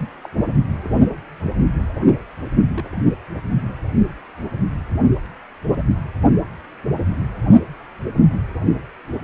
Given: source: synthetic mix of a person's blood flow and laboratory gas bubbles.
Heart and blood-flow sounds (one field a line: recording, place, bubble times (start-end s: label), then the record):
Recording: Doppler ultrasound of blood flow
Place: precordium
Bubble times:
0.23-0.29 s: bubbles
0.82-0.88 s: bubbles
2.74-3.03 s: bubbles
8.68-8.75 s: bubbles
From the record:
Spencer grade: 2 (many but less than half of the cardiac periods contain bubble signals, singularly or in groups)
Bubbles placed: only in the low amplitude regions of the cardiac cycle